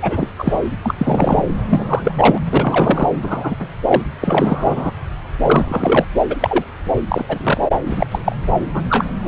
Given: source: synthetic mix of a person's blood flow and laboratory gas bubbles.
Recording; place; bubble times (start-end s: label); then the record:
Doppler ultrasound of blood flow; subclavian vein
0.02-0.28 s: bubbles
0.38-0.59 s: bubbles
0.83-0.95 s: bubbles
0.98-1.44 s: bubbles
1.65-2.12 s: bubbles
2.17-2.38 s: bubbles
2.50-3.08 s: bubbles
3.22-3.56 s: bubbles
3.59-3.67 s: bubbles
3.88-4.03 s: bubbles
4.21-4.91 s: bubbles
5.42-6.05 s: bubbles
6.29-6.37 s: bubbles
6.40-6.65 s: bubbles
7.08-7.60 s: bubbles
7.83-8.06 s: bubbles
8.11-8.19 s: bubbles
8.24-8.36 s: bubbles
8.73-8.83 s: bubbles
8.89-9.06 s: bubbles
From the record:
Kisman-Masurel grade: 233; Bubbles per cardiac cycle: several, 3 to 8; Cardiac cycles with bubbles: 50 to 99%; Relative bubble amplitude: loud (0.450 to 0.775); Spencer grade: 3 (all of the cardiac periods contain showers or single bubble signals, but not dominating or overriding the cardiac motion signals); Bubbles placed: anywhere in the cardiac cycle